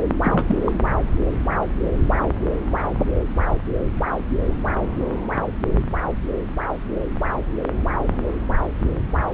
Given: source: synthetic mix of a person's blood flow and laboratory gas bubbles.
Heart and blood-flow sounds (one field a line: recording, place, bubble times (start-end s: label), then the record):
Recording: Doppler ultrasound of blood flow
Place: subclavian vein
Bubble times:
0.23-0.55 s: bubbles
0.65-0.72 s: bubbles
From the record:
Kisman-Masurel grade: 212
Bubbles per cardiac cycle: several, 3 to 8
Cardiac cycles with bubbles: 1 to 10%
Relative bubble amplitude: moderate (0.250 to 0.450)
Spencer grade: 1 (occasional bubble signal discernible with the cardiac motion signal, with majority of cardiac periods free of bubbles)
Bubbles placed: anywhere in the cardiac cycle